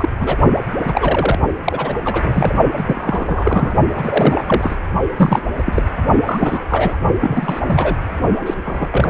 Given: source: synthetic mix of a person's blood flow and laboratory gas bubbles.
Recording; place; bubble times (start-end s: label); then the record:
Doppler ultrasound of blood flow; precordium
0.00-0.09 s: bubbles
0.20-0.37 s: bubbles
0.84-1.39 s: bubbles
1.64-1.95 s: bubbles
2.05-2.57 s: bubbles
2.76-3.75 s: bubbles
3.95-4.77 s: bubbles
5.17-5.41 s: bubbles
5.58-5.83 s: bubbles
6.24-6.62 s: bubbles
6.68-6.96 s: bubbles
7.20-7.95 s: bubbles
8.40-8.54 s: bubbles
8.64-9.10 s: bubbles
From the record:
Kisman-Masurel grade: 343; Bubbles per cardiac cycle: rolling drumbeat, 9 or more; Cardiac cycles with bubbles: 100%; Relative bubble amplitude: loud (0.450 to 0.775); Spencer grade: 3 (all of the cardiac periods contain showers or single bubble signals, but not dominating or overriding the cardiac motion signals); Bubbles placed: only in the low amplitude regions of the cardiac cycle